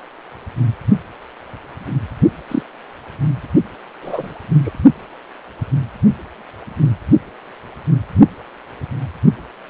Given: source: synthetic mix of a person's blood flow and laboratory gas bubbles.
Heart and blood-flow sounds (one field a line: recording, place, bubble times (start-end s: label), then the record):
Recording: Doppler ultrasound of blood flow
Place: precordium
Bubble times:
2.48-2.62 s: bubbles
4.02-4.33 s: bubbles
4.64-4.71 s: bubbles
From the record:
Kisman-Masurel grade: 122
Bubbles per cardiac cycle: 1 to 2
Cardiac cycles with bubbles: 10 to 50%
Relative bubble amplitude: moderate (0.250 to 0.450)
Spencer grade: 2 (many but less than half of the cardiac periods contain bubble signals, singularly or in groups)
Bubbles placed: only in the low amplitude regions of the cardiac cycle